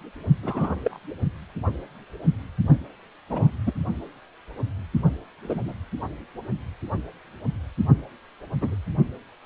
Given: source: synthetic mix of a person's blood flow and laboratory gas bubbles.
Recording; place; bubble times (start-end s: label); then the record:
Doppler ultrasound of blood flow; precordium
0.43-0.75 s: bubbles
0.84-0.98 s: bubbles
3.29-3.51 s: bubbles
3.65-3.73 s: bubbles
5.43-5.74 s: bubbles
8.61-8.75 s: bubbles
From the record:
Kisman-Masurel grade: 122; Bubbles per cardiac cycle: 1 to 2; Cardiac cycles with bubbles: 10 to 50%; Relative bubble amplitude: moderate (0.250 to 0.450); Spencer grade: 2 (many but less than half of the cardiac periods contain bubble signals, singularly or in groups); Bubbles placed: only in the low amplitude regions of the cardiac cycle